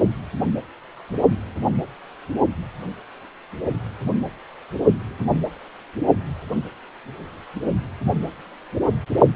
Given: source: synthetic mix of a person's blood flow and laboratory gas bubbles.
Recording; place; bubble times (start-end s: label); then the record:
Doppler ultrasound of blood flow; precordium
no bubbles
From the record:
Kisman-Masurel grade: 000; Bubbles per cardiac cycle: 0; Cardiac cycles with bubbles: 0%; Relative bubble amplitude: no bubbles discernible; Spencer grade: 0 (complete lack of bubble signals)